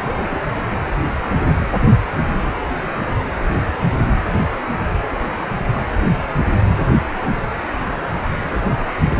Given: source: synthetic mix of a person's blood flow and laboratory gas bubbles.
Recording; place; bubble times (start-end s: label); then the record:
Doppler ultrasound of blood flow; precordium
0.00-0.40 s: bubbles
0.52-0.57 s: bubbles
From the record:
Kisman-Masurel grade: 211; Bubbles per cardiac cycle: several, 3 to 8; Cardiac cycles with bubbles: 1 to 10%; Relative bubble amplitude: barely perceptible (0.100 to 0.250); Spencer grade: 1 (occasional bubble signal discernible with the cardiac motion signal, with majority of cardiac periods free of bubbles); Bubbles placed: anywhere in the cardiac cycle